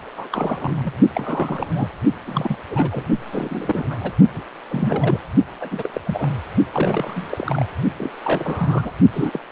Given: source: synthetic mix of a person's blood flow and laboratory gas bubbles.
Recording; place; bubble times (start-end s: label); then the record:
Doppler ultrasound of blood flow; precordium
0.17-0.28 s: bubbles
0.31-0.92 s: bubbles
1.14-1.89 s: bubbles
2.26-2.58 s: bubbles
2.70-3.05 s: bubbles
3.31-4.12 s: bubbles
4.34-4.43 s: bubbles
4.70-5.19 s: bubbles
5.61-5.88 s: bubbles
5.93-6.01 s: bubbles
6.07-6.29 s: bubbles
6.72-7.27 s: bubbles
7.30-7.68 s: bubbles
7.98-8.10 s: bubbles
8.24-8.92 s: bubbles
9.12-9.39 s: bubbles
From the record:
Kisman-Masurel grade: 342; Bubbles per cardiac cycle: rolling drumbeat, 9 or more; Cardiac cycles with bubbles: 100%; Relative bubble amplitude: moderate (0.250 to 0.450); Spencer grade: 3 (all of the cardiac periods contain showers or single bubble signals, but not dominating or overriding the cardiac motion signals); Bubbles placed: only in the low amplitude regions of the cardiac cycle